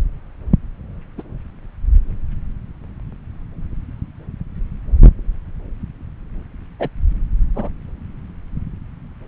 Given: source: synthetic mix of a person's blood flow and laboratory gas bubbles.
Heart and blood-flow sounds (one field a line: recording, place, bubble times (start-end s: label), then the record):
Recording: Doppler ultrasound of blood flow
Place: subclavian vein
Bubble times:
1.17-1.22 s: bubbles
6.79-6.88 s: bubbles
7.55-7.69 s: bubbles
From the record:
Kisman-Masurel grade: 122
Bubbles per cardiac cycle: 1 to 2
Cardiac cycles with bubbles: 10 to 50%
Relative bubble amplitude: moderate (0.250 to 0.450)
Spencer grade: 2 (many but less than half of the cardiac periods contain bubble signals, singularly or in groups)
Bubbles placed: anywhere in the cardiac cycle